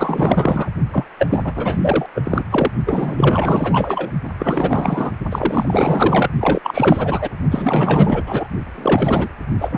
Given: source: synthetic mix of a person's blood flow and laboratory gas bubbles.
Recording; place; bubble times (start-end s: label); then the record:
Doppler ultrasound of blood flow; precordium
0.00-0.70 s: bubbles
0.92-1.04 s: bubbles
1.19-1.52 s: bubbles
1.55-2.06 s: bubbles
2.15-2.42 s: bubbles
2.50-2.71 s: bubbles
2.85-4.11 s: bubbles
4.23-4.30 s: bubbles
4.39-5.12 s: bubbles
5.29-6.30 s: bubbles
6.40-7.30 s: bubbles
7.50-8.22 s: bubbles
8.26-8.47 s: bubbles
8.75-9.29 s: bubbles
9.61-9.77 s: bubbles
From the record:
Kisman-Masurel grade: 444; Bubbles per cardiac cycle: continuous sound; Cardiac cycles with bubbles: 100%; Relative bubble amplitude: maximal (0.775 to 0.999); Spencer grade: 4 (maximum detectable bubble signal sounding continuously throughout systole and diastole of every cardiac period, and overriding the amplitude of the normal cardiac signals); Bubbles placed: only in the low amplitude regions of the cardiac cycle